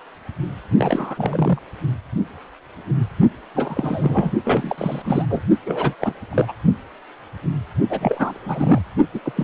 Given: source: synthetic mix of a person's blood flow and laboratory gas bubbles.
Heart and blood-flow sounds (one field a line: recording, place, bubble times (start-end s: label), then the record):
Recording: Doppler ultrasound of blood flow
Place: precordium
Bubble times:
0.78-1.59 s: bubbles
3.54-4.31 s: bubbles
4.44-5.02 s: bubbles
5.04-5.25 s: bubbles
5.29-5.42 s: bubbles
5.66-5.94 s: bubbles
6.01-6.13 s: bubbles
6.32-6.52 s: bubbles
7.89-8.82 s: bubbles
9.13-9.20 s: bubbles
9.25-9.32 s: bubbles
9.36-9.44 s: bubbles
From the record:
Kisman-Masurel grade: 332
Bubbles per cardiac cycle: rolling drumbeat, 9 or more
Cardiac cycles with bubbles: 50 to 99%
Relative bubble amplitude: moderate (0.250 to 0.450)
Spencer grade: 3 (all of the cardiac periods contain showers or single bubble signals, but not dominating or overriding the cardiac motion signals)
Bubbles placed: only in the low amplitude regions of the cardiac cycle